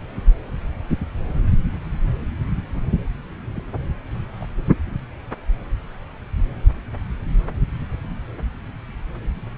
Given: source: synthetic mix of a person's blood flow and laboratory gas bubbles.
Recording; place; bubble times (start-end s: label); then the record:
Doppler ultrasound of blood flow; subclavian vein
0.12-0.29 s: bubbles
3.56-3.63 s: bubbles
4.40-4.46 s: bubbles
From the record:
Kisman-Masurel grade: 121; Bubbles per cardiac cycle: 1 to 2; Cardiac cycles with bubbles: 10 to 50%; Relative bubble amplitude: barely perceptible (0.100 to 0.250); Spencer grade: 2 (many but less than half of the cardiac periods contain bubble signals, singularly or in groups); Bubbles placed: anywhere in the cardiac cycle